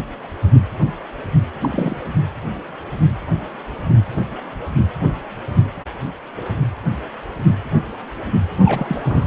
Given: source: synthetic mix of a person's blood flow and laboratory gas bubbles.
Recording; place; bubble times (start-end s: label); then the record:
Doppler ultrasound of blood flow; precordium
1.60-1.96 s: bubbles
8.64-9.27 s: bubbles
From the record:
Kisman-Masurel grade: 222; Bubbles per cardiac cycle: several, 3 to 8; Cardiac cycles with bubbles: 10 to 50%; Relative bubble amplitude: moderate (0.250 to 0.450); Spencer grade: 2 (many but less than half of the cardiac periods contain bubble signals, singularly or in groups); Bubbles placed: anywhere in the cardiac cycle